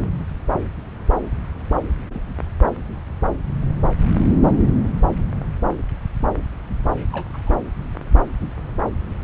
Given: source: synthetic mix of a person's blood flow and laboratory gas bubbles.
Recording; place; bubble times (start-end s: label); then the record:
Doppler ultrasound of blood flow; subclavian vein
2.13-2.21 s: bubbles
7.12-7.51 s: bubbles
From the record:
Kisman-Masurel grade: 121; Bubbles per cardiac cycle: 1 to 2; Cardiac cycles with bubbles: 10 to 50%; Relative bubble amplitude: barely perceptible (0.100 to 0.250); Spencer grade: 2 (many but less than half of the cardiac periods contain bubble signals, singularly or in groups); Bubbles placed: anywhere in the cardiac cycle